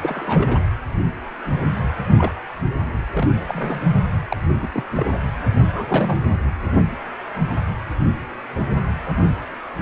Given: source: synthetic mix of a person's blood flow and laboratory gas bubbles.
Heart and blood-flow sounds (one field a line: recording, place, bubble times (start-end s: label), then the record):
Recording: Doppler ultrasound of blood flow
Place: precordium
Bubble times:
0.02-0.60 s: bubbles
2.18-2.32 s: bubbles
2.50-2.54 s: bubbles
3.14-3.28 s: bubbles
3.48-3.81 s: bubbles
4.29-4.38 s: bubbles
4.59-4.69 s: bubbles
4.74-4.84 s: bubbles
4.96-5.12 s: bubbles
5.74-6.18 s: bubbles
From the record:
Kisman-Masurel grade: 222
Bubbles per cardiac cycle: several, 3 to 8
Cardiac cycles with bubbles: 10 to 50%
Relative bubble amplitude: moderate (0.250 to 0.450)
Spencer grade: 2 (many but less than half of the cardiac periods contain bubble signals, singularly or in groups)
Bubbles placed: only in the low amplitude regions of the cardiac cycle